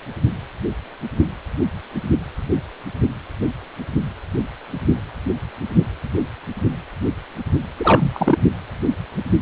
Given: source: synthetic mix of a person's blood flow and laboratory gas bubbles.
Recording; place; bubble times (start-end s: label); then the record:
Doppler ultrasound of blood flow; precordium
7.77-8.38 s: bubbles
From the record:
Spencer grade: 1 (occasional bubble signal discernible with the cardiac motion signal, with majority of cardiac periods free of bubbles); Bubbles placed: anywhere in the cardiac cycle